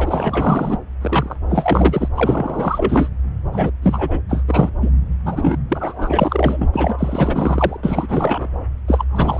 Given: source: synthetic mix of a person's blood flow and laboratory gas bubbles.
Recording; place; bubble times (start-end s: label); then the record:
Doppler ultrasound of blood flow; subclavian vein
0.00-0.78 s: bubbles
1.01-1.35 s: bubbles
1.49-2.08 s: bubbles
2.15-3.09 s: bubbles
3.52-3.71 s: bubbles
3.82-4.21 s: bubbles
4.29-4.43 s: bubbles
4.47-4.70 s: bubbles
4.81-4.90 s: bubbles
5.25-5.57 s: bubbles
5.69-6.69 s: bubbles
6.72-7.77 s: bubbles
7.83-8.49 s: bubbles
8.88-9.05 s: bubbles
9.10-9.40 s: bubbles
From the record:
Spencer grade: 4 (maximum detectable bubble signal sounding continuously throughout systole and diastole of every cardiac period, and overriding the amplitude of the normal cardiac signals); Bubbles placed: anywhere in the cardiac cycle